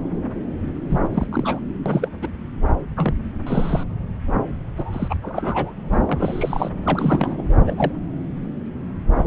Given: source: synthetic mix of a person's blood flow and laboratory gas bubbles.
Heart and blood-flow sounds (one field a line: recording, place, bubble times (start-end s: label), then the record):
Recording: Doppler ultrasound of blood flow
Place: subclavian vein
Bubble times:
0.89-1.00 s: bubbles
1.12-1.65 s: bubbles
1.85-2.08 s: bubbles
2.21-2.29 s: bubbles
2.96-3.14 s: bubbles
3.46-3.83 s: bubbles
4.77-5.16 s: bubbles
5.22-5.72 s: bubbles
5.92-5.98 s: bubbles
6.06-6.70 s: bubbles
6.83-7.42 s: bubbles
7.67-7.92 s: bubbles
From the record:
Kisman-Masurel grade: 232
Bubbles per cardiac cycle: several, 3 to 8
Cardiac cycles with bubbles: 50 to 99%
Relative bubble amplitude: moderate (0.250 to 0.450)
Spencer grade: 3 (all of the cardiac periods contain showers or single bubble signals, but not dominating or overriding the cardiac motion signals)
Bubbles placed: anywhere in the cardiac cycle